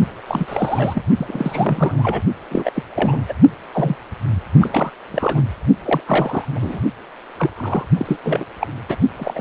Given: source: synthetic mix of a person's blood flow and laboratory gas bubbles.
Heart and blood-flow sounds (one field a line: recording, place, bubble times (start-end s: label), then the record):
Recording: Doppler ultrasound of blood flow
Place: precordium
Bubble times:
0.27-1.02 s: bubbles
1.17-2.22 s: bubbles
2.50-2.71 s: bubbles
2.74-2.82 s: bubbles
2.95-3.21 s: bubbles
3.28-3.34 s: bubbles
3.72-3.95 s: bubbles
4.59-4.91 s: bubbles
5.06-5.43 s: bubbles
5.85-6.01 s: bubbles
6.06-6.45 s: bubbles
6.56-6.81 s: bubbles
7.39-7.50 s: bubbles
7.57-7.85 s: bubbles
7.97-8.17 s: bubbles
8.23-8.45 s: bubbles
8.61-8.68 s: bubbles
8.88-8.96 s: bubbles
9.16-9.41 s: bubbles
From the record:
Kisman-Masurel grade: 342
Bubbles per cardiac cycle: rolling drumbeat, 9 or more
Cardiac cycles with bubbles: 100%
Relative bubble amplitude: moderate (0.250 to 0.450)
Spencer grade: 3 (all of the cardiac periods contain showers or single bubble signals, but not dominating or overriding the cardiac motion signals)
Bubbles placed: only in the low amplitude regions of the cardiac cycle